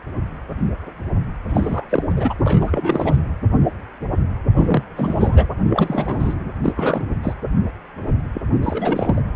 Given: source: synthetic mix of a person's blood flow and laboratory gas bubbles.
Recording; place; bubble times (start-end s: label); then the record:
Doppler ultrasound of blood flow; precordium
1.49-2.02 s: bubbles
2.09-2.33 s: bubbles
2.44-3.20 s: bubbles
4.56-4.83 s: bubbles
4.96-5.49 s: bubbles
5.70-6.42 s: bubbles
6.63-6.72 s: bubbles
6.76-7.05 s: bubbles
7.22-7.34 s: bubbles
8.34-8.41 s: bubbles
8.62-9.21 s: bubbles
From the record:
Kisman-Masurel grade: 332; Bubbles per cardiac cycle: rolling drumbeat, 9 or more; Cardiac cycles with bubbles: 50 to 99%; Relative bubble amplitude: moderate (0.250 to 0.450); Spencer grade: 3 (all of the cardiac periods contain showers or single bubble signals, but not dominating or overriding the cardiac motion signals); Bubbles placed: anywhere in the cardiac cycle